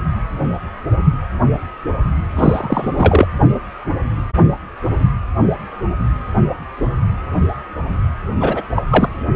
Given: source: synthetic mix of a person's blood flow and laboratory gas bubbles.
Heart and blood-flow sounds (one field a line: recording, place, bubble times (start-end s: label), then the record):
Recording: Doppler ultrasound of blood flow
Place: precordium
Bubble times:
2.36-3.27 s: bubbles
8.40-8.62 s: bubbles
8.76-8.82 s: bubbles
8.91-9.09 s: bubbles
From the record:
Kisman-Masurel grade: 223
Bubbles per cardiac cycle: several, 3 to 8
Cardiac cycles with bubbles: 10 to 50%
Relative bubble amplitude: loud (0.450 to 0.775)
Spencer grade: 2 (many but less than half of the cardiac periods contain bubble signals, singularly or in groups)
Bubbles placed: anywhere in the cardiac cycle